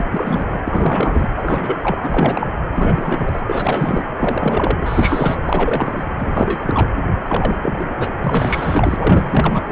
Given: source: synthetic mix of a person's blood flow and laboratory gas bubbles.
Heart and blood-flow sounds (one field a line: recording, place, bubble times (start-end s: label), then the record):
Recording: Doppler ultrasound of blood flow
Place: precordium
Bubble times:
0.00-0.04 s: bubbles
0.12-0.61 s: bubbles
0.65-1.27 s: bubbles
1.36-1.77 s: bubbles
1.82-1.97 s: bubbles
2.03-2.48 s: bubbles
2.75-3.42 s: bubbles
3.48-4.04 s: bubbles
4.17-4.77 s: bubbles
4.80-5.37 s: bubbles
5.44-6.04 s: bubbles
6.18-6.88 s: bubbles
7.24-7.94 s: bubbles
8.00-8.11 s: bubbles
8.24-8.96 s: bubbles
8.99-9.62 s: bubbles
9.65-9.72 s: bubbles
From the record:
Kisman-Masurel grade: 342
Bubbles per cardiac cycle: rolling drumbeat, 9 or more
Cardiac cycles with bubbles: 100%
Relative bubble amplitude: moderate (0.250 to 0.450)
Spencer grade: 3 (all of the cardiac periods contain showers or single bubble signals, but not dominating or overriding the cardiac motion signals)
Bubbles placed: anywhere in the cardiac cycle